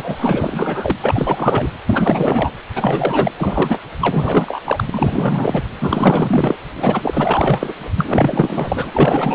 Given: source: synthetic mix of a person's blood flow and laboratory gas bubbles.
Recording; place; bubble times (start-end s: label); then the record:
Doppler ultrasound of blood flow; precordium
0.00-0.97 s: bubbles
1.02-1.68 s: bubbles
1.86-2.51 s: bubbles
2.75-3.33 s: bubbles
3.38-3.79 s: bubbles
4.00-4.60 s: bubbles
4.65-5.63 s: bubbles
5.80-6.56 s: bubbles
6.76-7.73 s: bubbles
7.95-9.35 s: bubbles
From the record:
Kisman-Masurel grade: 444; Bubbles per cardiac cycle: continuous sound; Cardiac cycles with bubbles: 100%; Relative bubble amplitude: maximal (0.775 to 0.999); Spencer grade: 4 (maximum detectable bubble signal sounding continuously throughout systole and diastole of every cardiac period, and overriding the amplitude of the normal cardiac signals); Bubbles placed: anywhere in the cardiac cycle